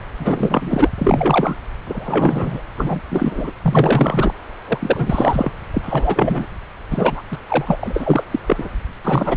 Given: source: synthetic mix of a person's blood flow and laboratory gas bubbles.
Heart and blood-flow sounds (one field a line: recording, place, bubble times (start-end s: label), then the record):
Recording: Doppler ultrasound of blood flow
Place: subclavian vein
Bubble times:
0.19-0.90 s: bubbles
0.97-1.56 s: bubbles
1.86-2.62 s: bubbles
2.77-3.00 s: bubbles
3.10-3.52 s: bubbles
3.62-4.32 s: bubbles
4.67-5.51 s: bubbles
5.73-6.46 s: bubbles
6.90-7.22 s: bubbles
7.31-7.38 s: bubbles
7.48-8.24 s: bubbles
8.30-8.39 s: bubbles
8.46-8.69 s: bubbles
9.03-9.37 s: bubbles
From the record:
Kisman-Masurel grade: 343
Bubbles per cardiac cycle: rolling drumbeat, 9 or more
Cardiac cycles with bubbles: 100%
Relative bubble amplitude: loud (0.450 to 0.775)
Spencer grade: 3 (all of the cardiac periods contain showers or single bubble signals, but not dominating or overriding the cardiac motion signals)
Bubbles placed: anywhere in the cardiac cycle